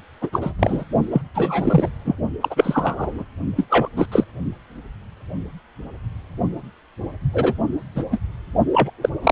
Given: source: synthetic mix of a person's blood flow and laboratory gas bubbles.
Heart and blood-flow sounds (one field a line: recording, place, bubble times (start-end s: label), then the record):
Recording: Doppler ultrasound of blood flow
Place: precordium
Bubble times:
0.21-0.30 s: bubbles
0.33-0.52 s: bubbles
0.59-0.85 s: bubbles
1.11-1.21 s: bubbles
1.34-1.90 s: bubbles
2.04-2.15 s: bubbles
2.40-3.25 s: bubbles
3.56-3.65 s: bubbles
3.69-3.89 s: bubbles
3.96-4.07 s: bubbles
4.12-4.24 s: bubbles
7.33-7.54 s: bubbles
7.96-8.04 s: bubbles
8.12-8.19 s: bubbles
8.71-8.91 s: bubbles
9.02-9.09 s: bubbles
9.24-9.31 s: bubbles
From the record:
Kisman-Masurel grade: 233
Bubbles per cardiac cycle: several, 3 to 8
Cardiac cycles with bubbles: 50 to 99%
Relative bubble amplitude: loud (0.450 to 0.775)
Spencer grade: 3 (all of the cardiac periods contain showers or single bubble signals, but not dominating or overriding the cardiac motion signals)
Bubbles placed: only in the low amplitude regions of the cardiac cycle